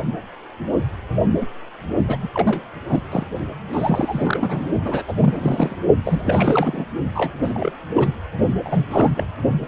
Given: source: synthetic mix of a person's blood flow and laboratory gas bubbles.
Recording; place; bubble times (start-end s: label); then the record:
Doppler ultrasound of blood flow; precordium
1.41-1.47 s: bubbles
1.99-2.05 s: bubbles
2.07-2.17 s: bubbles
2.21-2.29 s: bubbles
2.33-2.62 s: bubbles
2.89-3.03 s: bubbles
3.10-3.25 s: bubbles
3.71-4.67 s: bubbles
4.83-5.02 s: bubbles
5.08-5.14 s: bubbles
5.22-5.76 s: bubbles
6.04-6.85 s: bubbles
7.15-7.33 s: bubbles
7.42-7.71 s: bubbles
7.92-8.12 s: bubbles
8.63-9.26 s: bubbles
From the record:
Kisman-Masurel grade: 332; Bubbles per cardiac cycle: rolling drumbeat, 9 or more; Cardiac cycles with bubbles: 50 to 99%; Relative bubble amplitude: moderate (0.250 to 0.450); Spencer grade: 3 (all of the cardiac periods contain showers or single bubble signals, but not dominating or overriding the cardiac motion signals); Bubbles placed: only in the low amplitude regions of the cardiac cycle